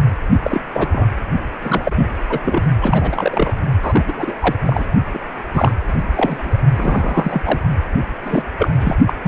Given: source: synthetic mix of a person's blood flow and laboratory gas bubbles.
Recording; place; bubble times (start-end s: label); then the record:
Doppler ultrasound of blood flow; precordium
0.44-0.61 s: bubbles
0.73-1.07 s: bubbles
1.61-2.08 s: bubbles
2.29-2.39 s: bubbles
2.44-2.62 s: bubbles
2.82-3.57 s: bubbles
3.82-4.04 s: bubbles
4.07-4.36 s: bubbles
4.41-4.56 s: bubbles
4.66-4.85 s: bubbles
5.13-5.20 s: bubbles
5.53-5.73 s: bubbles
5.88-6.04 s: bubbles
6.15-6.61 s: bubbles
6.76-7.42 s: bubbles
7.45-7.58 s: bubbles
8.24-8.42 s: bubbles
8.58-8.71 s: bubbles
8.80-8.96 s: bubbles
9.06-9.13 s: bubbles
9.23-9.27 s: bubbles
From the record:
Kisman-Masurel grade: 242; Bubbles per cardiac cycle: several, 3 to 8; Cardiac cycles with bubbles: 100%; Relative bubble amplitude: moderate (0.250 to 0.450); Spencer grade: 3 (all of the cardiac periods contain showers or single bubble signals, but not dominating or overriding the cardiac motion signals); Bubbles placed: only in the low amplitude regions of the cardiac cycle